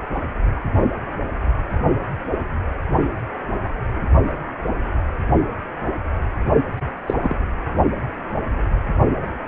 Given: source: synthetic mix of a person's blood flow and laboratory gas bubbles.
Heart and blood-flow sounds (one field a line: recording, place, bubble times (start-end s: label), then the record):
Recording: Doppler ultrasound of blood flow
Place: precordium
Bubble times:
7.07-7.13 s: bubbles
7.21-7.35 s: bubbles
From the record:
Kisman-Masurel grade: 122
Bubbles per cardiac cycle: 1 to 2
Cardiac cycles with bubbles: 10 to 50%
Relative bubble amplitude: moderate (0.250 to 0.450)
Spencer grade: 2 (many but less than half of the cardiac periods contain bubble signals, singularly or in groups)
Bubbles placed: only in the low amplitude regions of the cardiac cycle